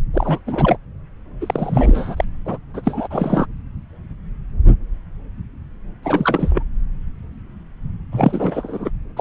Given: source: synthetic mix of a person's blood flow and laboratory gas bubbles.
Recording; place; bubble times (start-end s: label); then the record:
Doppler ultrasound of blood flow; subclavian vein
0.13-0.39 s: bubbles
0.47-0.77 s: bubbles
1.41-2.25 s: bubbles
2.45-2.58 s: bubbles
2.73-3.08 s: bubbles
3.10-3.46 s: bubbles
6.03-6.63 s: bubbles
8.11-8.90 s: bubbles
9.16-9.21 s: bubbles
From the record:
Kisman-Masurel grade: 332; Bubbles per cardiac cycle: rolling drumbeat, 9 or more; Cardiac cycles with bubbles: 50 to 99%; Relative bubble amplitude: moderate (0.250 to 0.450); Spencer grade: 3 (all of the cardiac periods contain showers or single bubble signals, but not dominating or overriding the cardiac motion signals); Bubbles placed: anywhere in the cardiac cycle